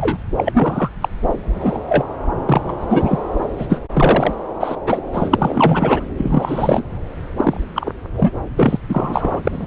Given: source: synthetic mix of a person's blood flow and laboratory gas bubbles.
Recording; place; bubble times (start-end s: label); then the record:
Doppler ultrasound of blood flow; subclavian vein
0.00-0.17 s: bubbles
0.36-0.89 s: bubbles
1.00-1.08 s: bubbles
1.54-1.78 s: bubbles
1.88-2.04 s: bubbles
2.46-3.18 s: bubbles
3.58-3.67 s: bubbles
3.69-3.80 s: bubbles
3.94-4.33 s: bubbles
4.60-4.75 s: bubbles
4.86-5.01 s: bubbles
5.13-5.35 s: bubbles
5.39-6.03 s: bubbles
6.17-6.87 s: bubbles
7.37-7.60 s: bubbles
7.75-7.90 s: bubbles
8.16-8.32 s: bubbles
8.57-8.78 s: bubbles
8.89-9.40 s: bubbles
9.44-9.66 s: bubbles
From the record:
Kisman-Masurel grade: 243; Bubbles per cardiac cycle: several, 3 to 8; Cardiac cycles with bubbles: 100%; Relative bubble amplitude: loud (0.450 to 0.775); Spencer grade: 3 (all of the cardiac periods contain showers or single bubble signals, but not dominating or overriding the cardiac motion signals); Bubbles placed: anywhere in the cardiac cycle